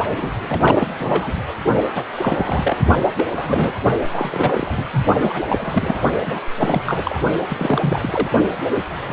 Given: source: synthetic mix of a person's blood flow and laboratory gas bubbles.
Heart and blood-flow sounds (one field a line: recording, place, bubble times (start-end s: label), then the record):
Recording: Doppler ultrasound of blood flow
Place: precordium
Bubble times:
0.00-0.31 s: bubbles
0.47-0.91 s: bubbles
0.99-1.32 s: bubbles
1.95-2.04 s: bubbles
2.13-2.77 s: bubbles
3.02-3.08 s: bubbles
3.18-3.25 s: bubbles
3.28-3.73 s: bubbles
4.11-4.84 s: bubbles
4.91-5.05 s: bubbles
5.20-5.42 s: bubbles
5.48-5.96 s: bubbles
6.26-6.40 s: bubbles
6.58-7.19 s: bubbles
7.48-8.30 s: bubbles
9.06-9.13 s: bubbles
From the record:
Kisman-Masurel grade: 342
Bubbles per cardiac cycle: rolling drumbeat, 9 or more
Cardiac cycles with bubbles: 100%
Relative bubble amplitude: moderate (0.250 to 0.450)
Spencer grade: 3 (all of the cardiac periods contain showers or single bubble signals, but not dominating or overriding the cardiac motion signals)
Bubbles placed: only in the low amplitude regions of the cardiac cycle